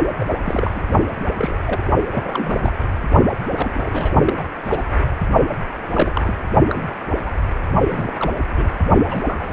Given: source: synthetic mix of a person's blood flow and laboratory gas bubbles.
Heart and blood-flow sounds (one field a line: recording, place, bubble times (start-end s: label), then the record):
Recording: Doppler ultrasound of blood flow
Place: precordium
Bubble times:
0.19-0.25 s: bubbles
0.45-0.82 s: bubbles
1.37-1.58 s: bubbles
1.65-1.83 s: bubbles
2.11-2.73 s: bubbles
3.56-3.70 s: bubbles
3.75-4.10 s: bubbles
4.26-4.43 s: bubbles
4.64-4.84 s: bubbles
5.92-6.34 s: bubbles
6.69-6.84 s: bubbles
7.26-7.31 s: bubbles
7.90-8.12 s: bubbles
8.19-8.31 s: bubbles
8.57-8.68 s: bubbles
9.09-9.23 s: bubbles
9.26-9.53 s: bubbles
From the record:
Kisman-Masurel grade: 242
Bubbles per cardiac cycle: several, 3 to 8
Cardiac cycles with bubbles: 100%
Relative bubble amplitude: moderate (0.250 to 0.450)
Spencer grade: 3 (all of the cardiac periods contain showers or single bubble signals, but not dominating or overriding the cardiac motion signals)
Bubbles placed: only in the low amplitude regions of the cardiac cycle